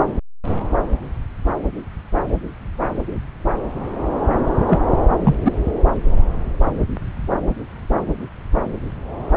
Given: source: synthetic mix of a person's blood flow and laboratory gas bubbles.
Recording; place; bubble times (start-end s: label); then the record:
Doppler ultrasound of blood flow; subclavian vein
4.67-4.79 s: bubbles
5.24-5.35 s: bubbles
5.45-5.53 s: bubbles
From the record:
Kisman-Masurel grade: 123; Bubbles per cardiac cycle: 1 to 2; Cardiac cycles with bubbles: 10 to 50%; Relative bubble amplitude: loud (0.450 to 0.775); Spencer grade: 2 (many but less than half of the cardiac periods contain bubble signals, singularly or in groups); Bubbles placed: anywhere in the cardiac cycle